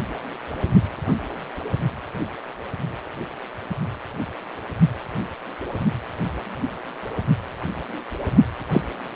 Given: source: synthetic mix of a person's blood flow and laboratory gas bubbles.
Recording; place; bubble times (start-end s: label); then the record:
Doppler ultrasound of blood flow; precordium
8.71-8.81 s: bubbles
From the record:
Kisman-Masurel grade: 113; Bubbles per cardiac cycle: 1 to 2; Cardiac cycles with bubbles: 1 to 10%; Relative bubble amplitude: loud (0.450 to 0.775); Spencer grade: 1 (occasional bubble signal discernible with the cardiac motion signal, with majority of cardiac periods free of bubbles); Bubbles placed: only in the low amplitude regions of the cardiac cycle